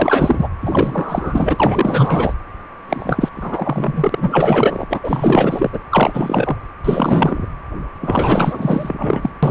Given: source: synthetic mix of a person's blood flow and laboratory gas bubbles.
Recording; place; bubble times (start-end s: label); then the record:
Doppler ultrasound of blood flow; precordium
0.00-0.48 s: bubbles
0.60-2.33 s: bubbles
2.89-3.29 s: bubbles
3.33-4.87 s: bubbles
4.90-5.00 s: bubbles
5.03-5.70 s: bubbles
5.73-5.79 s: bubbles
5.91-6.55 s: bubbles
6.84-7.46 s: bubbles
8.01-9.30 s: bubbles
9.43-9.51 s: bubbles
From the record:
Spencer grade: 4 (maximum detectable bubble signal sounding continuously throughout systole and diastole of every cardiac period, and overriding the amplitude of the normal cardiac signals); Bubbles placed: anywhere in the cardiac cycle